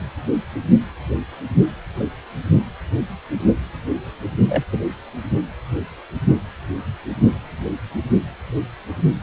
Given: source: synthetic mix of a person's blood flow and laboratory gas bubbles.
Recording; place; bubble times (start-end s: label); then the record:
Doppler ultrasound of blood flow; precordium
4.48-4.64 s: bubbles
4.71-4.80 s: bubbles
From the record:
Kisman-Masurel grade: 112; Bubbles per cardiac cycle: 1 to 2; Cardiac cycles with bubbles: 1 to 10%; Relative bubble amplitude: moderate (0.250 to 0.450); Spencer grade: 1 (occasional bubble signal discernible with the cardiac motion signal, with majority of cardiac periods free of bubbles); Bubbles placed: only in the low amplitude regions of the cardiac cycle